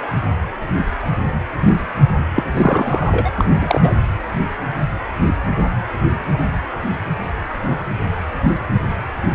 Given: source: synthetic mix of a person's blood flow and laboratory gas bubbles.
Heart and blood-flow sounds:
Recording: Doppler ultrasound of blood flow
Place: precordium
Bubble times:
2.34-2.44 s: bubbles
2.54-3.92 s: bubbles
From the record:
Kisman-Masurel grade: 223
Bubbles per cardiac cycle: several, 3 to 8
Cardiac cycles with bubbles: 10 to 50%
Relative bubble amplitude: loud (0.450 to 0.775)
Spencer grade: 2 (many but less than half of the cardiac periods contain bubble signals, singularly or in groups)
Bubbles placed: anywhere in the cardiac cycle

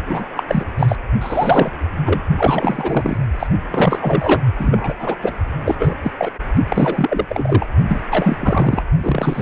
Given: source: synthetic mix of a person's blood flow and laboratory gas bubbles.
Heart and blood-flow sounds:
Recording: Doppler ultrasound of blood flow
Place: precordium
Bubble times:
0.06-0.24 s: bubbles
0.36-0.43 s: bubbles
0.48-0.65 s: bubbles
0.78-0.96 s: bubbles
1.21-1.72 s: bubbles
2.05-2.21 s: bubbles
2.36-3.17 s: bubbles
3.39-3.47 s: bubbles
3.70-4.41 s: bubbles
4.58-4.95 s: bubbles
4.99-5.17 s: bubbles
5.22-5.33 s: bubbles
5.64-5.75 s: bubbles
5.79-5.94 s: bubbles
6.03-6.12 s: bubbles
6.18-6.31 s: bubbles
6.69-7.25 s: bubbles
7.29-7.66 s: bubbles
7.88-8.02 s: bubbles
8.09-8.37 s: bubbles
8.39-8.83 s: bubbles
8.99-9.42 s: bubbles
From the record:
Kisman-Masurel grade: 343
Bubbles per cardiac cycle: rolling drumbeat, 9 or more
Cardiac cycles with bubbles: 100%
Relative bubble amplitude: loud (0.450 to 0.775)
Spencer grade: 3 (all of the cardiac periods contain showers or single bubble signals, but not dominating or overriding the cardiac motion signals)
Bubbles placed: only in the low amplitude regions of the cardiac cycle

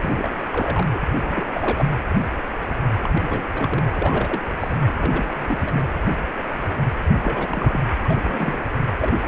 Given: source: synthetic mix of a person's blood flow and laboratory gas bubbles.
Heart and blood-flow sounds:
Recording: Doppler ultrasound of blood flow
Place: precordium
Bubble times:
0.00-0.13 s: bubbles
0.17-0.86 s: bubbles
0.92-0.98 s: bubbles
1.22-1.48 s: bubbles
1.54-1.85 s: bubbles
3.02-3.10 s: bubbles
3.12-3.44 s: bubbles
3.52-3.84 s: bubbles
3.94-4.42 s: bubbles
4.60-4.77 s: bubbles
4.88-4.93 s: bubbles
4.96-5.89 s: bubbles
7.23-7.79 s: bubbles
8.05-8.67 s: bubbles
8.99-9.15 s: bubbles
9.22-9.26 s: bubbles
From the record:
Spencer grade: 3 (all of the cardiac periods contain showers or single bubble signals, but not dominating or overriding the cardiac motion signals)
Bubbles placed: anywhere in the cardiac cycle

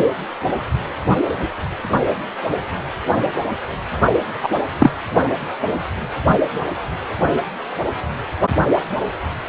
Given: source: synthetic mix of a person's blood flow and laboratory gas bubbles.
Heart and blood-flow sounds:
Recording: Doppler ultrasound of blood flow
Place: precordium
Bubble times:
4.43-4.49 s: bubbles
4.79-4.91 s: bubbles
From the record:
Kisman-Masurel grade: 113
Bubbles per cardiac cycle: 1 to 2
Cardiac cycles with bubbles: 1 to 10%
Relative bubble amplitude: loud (0.450 to 0.775)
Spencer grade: 1 (occasional bubble signal discernible with the cardiac motion signal, with majority of cardiac periods free of bubbles)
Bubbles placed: anywhere in the cardiac cycle

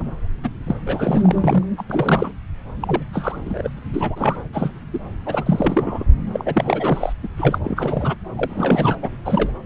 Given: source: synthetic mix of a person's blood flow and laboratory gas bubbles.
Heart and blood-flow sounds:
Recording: Doppler ultrasound of blood flow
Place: subclavian vein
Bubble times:
0.00-0.03 s: bubbles
0.43-0.49 s: bubbles
0.67-0.75 s: bubbles
0.86-1.64 s: bubbles
1.77-1.83 s: bubbles
1.90-2.32 s: bubbles
2.69-3.03 s: bubbles
3.13-3.70 s: bubbles
3.77-3.79 s: bubbles
3.93-4.36 s: bubbles
4.53-4.71 s: bubbles
4.93-5.00 s: bubbles
5.25-6.04 s: bubbles
6.33-7.13 s: bubbles
7.23-7.28 s: bubbles
7.37-7.58 s: bubbles
7.64-8.14 s: bubbles
8.37-8.96 s: bubbles
9.02-9.10 s: bubbles
9.25-9.52 s: bubbles
From the record:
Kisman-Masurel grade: 342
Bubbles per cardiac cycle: rolling drumbeat, 9 or more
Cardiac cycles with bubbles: 100%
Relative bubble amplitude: moderate (0.250 to 0.450)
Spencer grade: 3 (all of the cardiac periods contain showers or single bubble signals, but not dominating or overriding the cardiac motion signals)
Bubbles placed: anywhere in the cardiac cycle

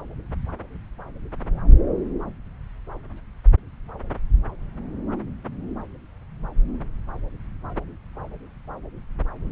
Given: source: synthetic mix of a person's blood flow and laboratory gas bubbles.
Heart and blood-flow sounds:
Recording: Doppler ultrasound of blood flow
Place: subclavian vein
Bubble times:
no bubbles
From the record:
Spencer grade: 0 (complete lack of bubble signals)

